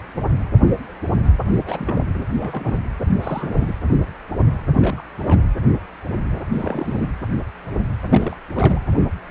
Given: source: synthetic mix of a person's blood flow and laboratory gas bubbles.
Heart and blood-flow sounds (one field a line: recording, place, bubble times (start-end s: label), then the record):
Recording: Doppler ultrasound of blood flow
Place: precordium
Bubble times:
1.46-2.04 s: bubbles
2.38-2.79 s: bubbles
3.21-3.73 s: bubbles
4.80-5.02 s: bubbles
5.27-5.43 s: bubbles
6.51-7.09 s: bubbles
8.10-8.35 s: bubbles
8.54-8.86 s: bubbles
From the record:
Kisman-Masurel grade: 221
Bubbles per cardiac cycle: several, 3 to 8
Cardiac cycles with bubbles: 10 to 50%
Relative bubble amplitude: barely perceptible (0.100 to 0.250)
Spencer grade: 2 (many but less than half of the cardiac periods contain bubble signals, singularly or in groups)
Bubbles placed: anywhere in the cardiac cycle